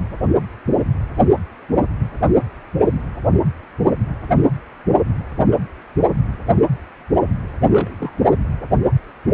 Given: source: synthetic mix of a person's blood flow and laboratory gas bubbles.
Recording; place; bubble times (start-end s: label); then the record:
Doppler ultrasound of blood flow; precordium
7.64-8.24 s: bubbles
From the record:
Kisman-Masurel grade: 211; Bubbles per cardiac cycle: several, 3 to 8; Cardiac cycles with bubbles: 1 to 10%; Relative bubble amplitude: barely perceptible (0.100 to 0.250); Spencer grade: 1 (occasional bubble signal discernible with the cardiac motion signal, with majority of cardiac periods free of bubbles); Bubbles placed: anywhere in the cardiac cycle